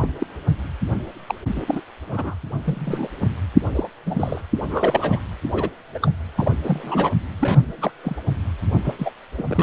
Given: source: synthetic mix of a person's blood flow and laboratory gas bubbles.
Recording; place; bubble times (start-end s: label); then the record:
Doppler ultrasound of blood flow; precordium
0.00-0.08 s: bubbles
0.18-0.27 s: bubbles
1.26-1.34 s: bubbles
1.55-1.81 s: bubbles
2.11-2.36 s: bubbles
2.65-3.09 s: bubbles
3.20-3.30 s: bubbles
3.74-3.88 s: bubbles
4.06-4.42 s: bubbles
4.55-5.20 s: bubbles
5.53-5.70 s: bubbles
5.95-5.99 s: bubbles
6.02-6.11 s: bubbles
6.37-6.57 s: bubbles
6.63-7.12 s: bubbles
7.39-7.91 s: bubbles
8.03-8.16 s: bubbles
8.84-8.95 s: bubbles
8.98-9.10 s: bubbles
9.38-9.43 s: bubbles
9.47-9.63 s: bubbles
From the record:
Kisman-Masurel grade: 242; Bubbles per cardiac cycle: several, 3 to 8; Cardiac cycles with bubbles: 100%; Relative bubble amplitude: moderate (0.250 to 0.450); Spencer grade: 3 (all of the cardiac periods contain showers or single bubble signals, but not dominating or overriding the cardiac motion signals); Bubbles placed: anywhere in the cardiac cycle